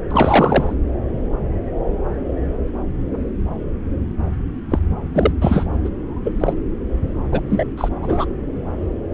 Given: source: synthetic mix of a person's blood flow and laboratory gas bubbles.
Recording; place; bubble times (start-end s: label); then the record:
Doppler ultrasound of blood flow; subclavian vein
0.10-0.74 s: bubbles
4.70-4.79 s: bubbles
5.14-5.32 s: bubbles
5.41-5.66 s: bubbles
5.84-5.90 s: bubbles
6.25-6.35 s: bubbles
6.40-6.53 s: bubbles
7.32-7.41 s: bubbles
7.50-7.65 s: bubbles
7.77-7.89 s: bubbles
8.01-8.25 s: bubbles
From the record:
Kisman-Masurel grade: 233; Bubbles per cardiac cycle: several, 3 to 8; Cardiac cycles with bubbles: 50 to 99%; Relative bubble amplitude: loud (0.450 to 0.775); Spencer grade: 3 (all of the cardiac periods contain showers or single bubble signals, but not dominating or overriding the cardiac motion signals); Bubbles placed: anywhere in the cardiac cycle